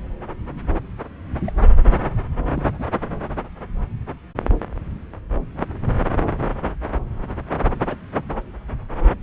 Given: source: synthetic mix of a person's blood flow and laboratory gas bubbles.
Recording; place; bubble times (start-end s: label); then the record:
Doppler ultrasound of blood flow; subclavian vein
1.46-1.51 s: bubbles
2.56-2.63 s: bubbles
2.79-2.84 s: bubbles
7.88-7.95 s: bubbles
8.12-8.23 s: bubbles
From the record:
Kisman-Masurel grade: 121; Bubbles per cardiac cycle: 1 to 2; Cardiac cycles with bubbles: 10 to 50%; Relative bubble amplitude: barely perceptible (0.100 to 0.250); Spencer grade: 2 (many but less than half of the cardiac periods contain bubble signals, singularly or in groups); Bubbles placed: anywhere in the cardiac cycle